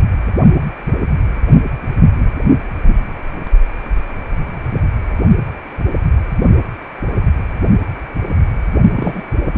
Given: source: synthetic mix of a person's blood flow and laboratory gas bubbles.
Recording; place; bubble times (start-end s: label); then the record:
Doppler ultrasound of blood flow; precordium
8.96-9.22 s: bubbles
9.53-9.58 s: bubbles
From the record:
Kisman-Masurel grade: 212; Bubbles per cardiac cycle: several, 3 to 8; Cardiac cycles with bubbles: 1 to 10%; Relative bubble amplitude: moderate (0.250 to 0.450); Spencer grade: 1 (occasional bubble signal discernible with the cardiac motion signal, with majority of cardiac periods free of bubbles); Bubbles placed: only in the low amplitude regions of the cardiac cycle